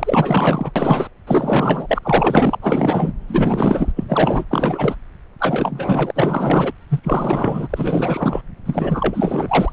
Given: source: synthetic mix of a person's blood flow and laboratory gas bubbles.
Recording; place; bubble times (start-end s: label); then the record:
Doppler ultrasound of blood flow; subclavian vein
0.00-0.71 s: bubbles
0.76-1.08 s: bubbles
1.27-1.99 s: bubbles
2.02-2.57 s: bubbles
2.62-3.12 s: bubbles
3.27-3.92 s: bubbles
3.96-4.45 s: bubbles
4.50-4.96 s: bubbles
5.39-6.12 s: bubbles
6.14-6.72 s: bubbles
6.89-7.00 s: bubbles
7.03-8.42 s: bubbles
8.66-9.73 s: bubbles
From the record:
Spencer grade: 4 (maximum detectable bubble signal sounding continuously throughout systole and diastole of every cardiac period, and overriding the amplitude of the normal cardiac signals); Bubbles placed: anywhere in the cardiac cycle